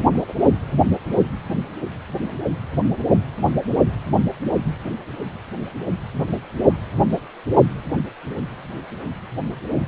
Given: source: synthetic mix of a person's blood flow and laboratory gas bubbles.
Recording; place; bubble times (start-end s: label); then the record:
Doppler ultrasound of blood flow; precordium
0.10-0.35 s: bubbles
From the record:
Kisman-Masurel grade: 221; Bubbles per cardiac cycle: several, 3 to 8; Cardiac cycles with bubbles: 10 to 50%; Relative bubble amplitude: barely perceptible (0.100 to 0.250); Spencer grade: 2 (many but less than half of the cardiac periods contain bubble signals, singularly or in groups); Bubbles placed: only in the low amplitude regions of the cardiac cycle